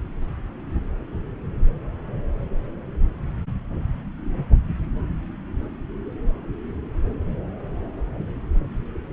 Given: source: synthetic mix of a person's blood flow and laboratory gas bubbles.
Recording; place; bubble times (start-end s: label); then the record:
Doppler ultrasound of blood flow; subclavian vein
no bubbles
From the record:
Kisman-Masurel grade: 000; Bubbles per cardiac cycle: 0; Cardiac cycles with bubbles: 0%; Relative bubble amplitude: no bubbles discernible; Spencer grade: 0 (complete lack of bubble signals)